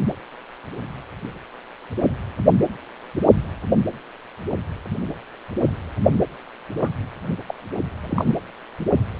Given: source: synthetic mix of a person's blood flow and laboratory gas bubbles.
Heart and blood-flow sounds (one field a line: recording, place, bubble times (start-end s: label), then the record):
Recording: Doppler ultrasound of blood flow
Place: precordium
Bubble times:
6.81-6.89 s: bubbles
7.48-7.54 s: bubbles
8.04-8.35 s: bubbles
From the record:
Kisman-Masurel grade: 221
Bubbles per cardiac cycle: several, 3 to 8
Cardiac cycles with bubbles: 10 to 50%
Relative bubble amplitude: barely perceptible (0.100 to 0.250)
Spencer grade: 2 (many but less than half of the cardiac periods contain bubble signals, singularly or in groups)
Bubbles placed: anywhere in the cardiac cycle